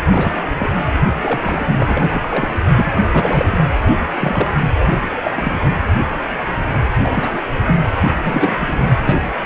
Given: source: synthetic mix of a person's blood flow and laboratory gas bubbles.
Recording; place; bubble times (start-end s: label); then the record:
Doppler ultrasound of blood flow; precordium
0.10-0.34 s: bubbles
0.57-0.70 s: bubbles
1.23-1.66 s: bubbles
1.79-2.49 s: bubbles
2.77-2.92 s: bubbles
3.13-3.64 s: bubbles
4.19-4.58 s: bubbles
5.23-5.31 s: bubbles
5.35-5.65 s: bubbles
6.97-7.44 s: bubbles
7.67-7.76 s: bubbles
8.03-8.79 s: bubbles
9.04-9.16 s: bubbles
From the record:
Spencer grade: 3 (all of the cardiac periods contain showers or single bubble signals, but not dominating or overriding the cardiac motion signals); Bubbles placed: anywhere in the cardiac cycle